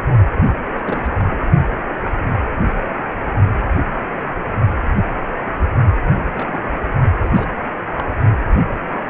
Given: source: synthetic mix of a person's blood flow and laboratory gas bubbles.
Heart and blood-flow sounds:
Doppler ultrasound of blood flow; precordium
0.36-0.53 s: bubbles
0.75-1.36 s: bubbles
6.17-6.30 s: bubbles
6.35-6.79 s: bubbles
7.19-7.48 s: bubbles
7.98-8.03 s: bubbles
From the record:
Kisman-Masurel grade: 221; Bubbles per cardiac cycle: several, 3 to 8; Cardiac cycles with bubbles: 10 to 50%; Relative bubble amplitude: barely perceptible (0.100 to 0.250); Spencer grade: 2 (many but less than half of the cardiac periods contain bubble signals, singularly or in groups); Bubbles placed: only in the low amplitude regions of the cardiac cycle

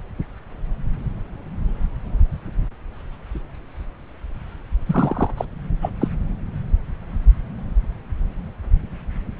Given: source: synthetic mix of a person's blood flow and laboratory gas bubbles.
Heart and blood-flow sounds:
Doppler ultrasound of blood flow; subclavian vein
4.86-5.31 s: bubbles
5.37-5.45 s: bubbles
5.82-5.90 s: bubbles
6.01-6.08 s: bubbles
From the record:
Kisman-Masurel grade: 212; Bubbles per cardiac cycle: several, 3 to 8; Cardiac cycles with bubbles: 1 to 10%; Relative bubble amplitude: moderate (0.250 to 0.450); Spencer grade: 1 (occasional bubble signal discernible with the cardiac motion signal, with majority of cardiac periods free of bubbles); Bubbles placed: anywhere in the cardiac cycle

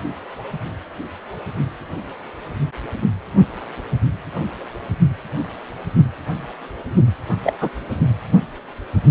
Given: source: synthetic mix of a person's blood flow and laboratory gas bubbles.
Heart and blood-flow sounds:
Doppler ultrasound of blood flow; precordium
7.43-7.53 s: bubbles
7.60-7.70 s: bubbles
From the record:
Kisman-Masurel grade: 113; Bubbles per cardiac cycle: 1 to 2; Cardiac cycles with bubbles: 1 to 10%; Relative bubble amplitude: loud (0.450 to 0.775); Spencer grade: 1 (occasional bubble signal discernible with the cardiac motion signal, with majority of cardiac periods free of bubbles); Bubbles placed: anywhere in the cardiac cycle

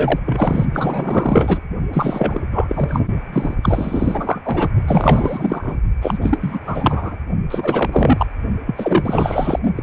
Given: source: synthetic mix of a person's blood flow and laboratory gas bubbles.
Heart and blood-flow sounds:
Doppler ultrasound of blood flow; precordium
0.00-0.19 s: bubbles
0.26-0.66 s: bubbles
0.73-1.60 s: bubbles
1.93-2.41 s: bubbles
2.52-3.10 s: bubbles
3.33-3.54 s: bubbles
3.62-4.42 s: bubbles
4.44-4.69 s: bubbles
4.88-5.76 s: bubbles
6.01-6.19 s: bubbles
6.21-7.17 s: bubbles
7.50-8.26 s: bubbles
8.66-9.59 s: bubbles
9.75-9.83 s: bubbles
From the record:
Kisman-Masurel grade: 444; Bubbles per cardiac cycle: continuous sound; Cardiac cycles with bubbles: 100%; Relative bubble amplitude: maximal (0.775 to 0.999); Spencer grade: 4 (maximum detectable bubble signal sounding continuously throughout systole and diastole of every cardiac period, and overriding the amplitude of the normal cardiac signals); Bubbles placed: only in the low amplitude regions of the cardiac cycle

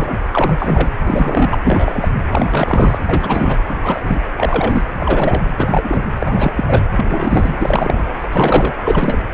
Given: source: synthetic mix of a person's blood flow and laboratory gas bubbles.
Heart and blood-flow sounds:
Doppler ultrasound of blood flow; precordium
0.00-0.18 s: bubbles
0.32-0.91 s: bubbles
1.07-1.58 s: bubbles
1.64-2.09 s: bubbles
2.29-2.98 s: bubbles
3.05-3.57 s: bubbles
3.67-3.79 s: bubbles
3.83-4.00 s: bubbles
4.07-4.22 s: bubbles
4.35-4.83 s: bubbles
5.00-5.42 s: bubbles
5.57-6.03 s: bubbles
6.18-6.53 s: bubbles
6.55-6.83 s: bubbles
6.96-8.15 s: bubbles
8.23-8.28 s: bubbles
8.31-8.75 s: bubbles
8.79-9.23 s: bubbles
From the record:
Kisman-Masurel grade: 342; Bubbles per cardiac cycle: rolling drumbeat, 9 or more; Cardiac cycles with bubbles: 100%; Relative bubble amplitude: moderate (0.250 to 0.450); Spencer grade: 3 (all of the cardiac periods contain showers or single bubble signals, but not dominating or overriding the cardiac motion signals); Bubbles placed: anywhere in the cardiac cycle

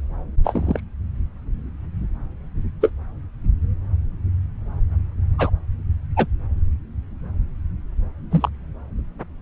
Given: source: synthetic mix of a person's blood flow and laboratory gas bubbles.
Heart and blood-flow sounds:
Doppler ultrasound of blood flow; subclavian vein
0.44-0.80 s: bubbles
2.81-2.89 s: bubbles
5.38-5.50 s: bubbles
6.16-6.27 s: bubbles
8.30-8.49 s: bubbles
From the record:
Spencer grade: 2 (many but less than half of the cardiac periods contain bubble signals, singularly or in groups); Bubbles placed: anywhere in the cardiac cycle

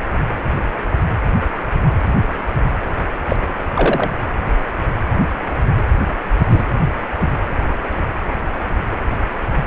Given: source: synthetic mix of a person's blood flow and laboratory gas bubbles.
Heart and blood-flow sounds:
Doppler ultrasound of blood flow; precordium
3.29-3.37 s: bubbles
3.74-4.10 s: bubbles
6.50-6.64 s: bubbles
7.18-7.33 s: bubbles
From the record:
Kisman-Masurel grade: 122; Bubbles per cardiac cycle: 1 to 2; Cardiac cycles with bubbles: 10 to 50%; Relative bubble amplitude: moderate (0.250 to 0.450); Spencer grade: 2 (many but less than half of the cardiac periods contain bubble signals, singularly or in groups); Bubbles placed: anywhere in the cardiac cycle

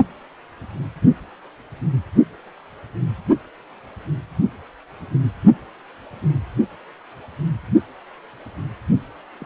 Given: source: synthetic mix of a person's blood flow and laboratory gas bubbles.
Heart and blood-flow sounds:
Doppler ultrasound of blood flow; precordium
9.40-9.46 s: bubbles
From the record:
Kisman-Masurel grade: 111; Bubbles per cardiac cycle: 1 to 2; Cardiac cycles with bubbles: 1 to 10%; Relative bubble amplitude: barely perceptible (0.100 to 0.250); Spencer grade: 1 (occasional bubble signal discernible with the cardiac motion signal, with majority of cardiac periods free of bubbles); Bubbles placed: only in the low amplitude regions of the cardiac cycle

